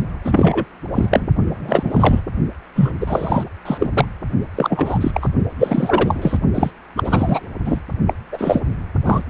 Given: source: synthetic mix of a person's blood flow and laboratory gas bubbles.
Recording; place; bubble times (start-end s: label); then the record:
Doppler ultrasound of blood flow; precordium
0.24-0.65 s: bubbles
0.94-1.27 s: bubbles
1.46-2.21 s: bubbles
2.75-2.91 s: bubbles
3.00-3.44 s: bubbles
3.65-4.07 s: bubbles
4.55-5.11 s: bubbles
5.13-5.29 s: bubbles
5.58-6.38 s: bubbles
6.54-6.71 s: bubbles
6.96-7.46 s: bubbles
7.65-7.81 s: bubbles
8.07-8.13 s: bubbles
8.32-8.62 s: bubbles
9.04-9.24 s: bubbles
From the record:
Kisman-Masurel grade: 343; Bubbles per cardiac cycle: rolling drumbeat, 9 or more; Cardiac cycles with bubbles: 100%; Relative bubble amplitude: loud (0.450 to 0.775); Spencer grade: 3 (all of the cardiac periods contain showers or single bubble signals, but not dominating or overriding the cardiac motion signals); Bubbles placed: only in the low amplitude regions of the cardiac cycle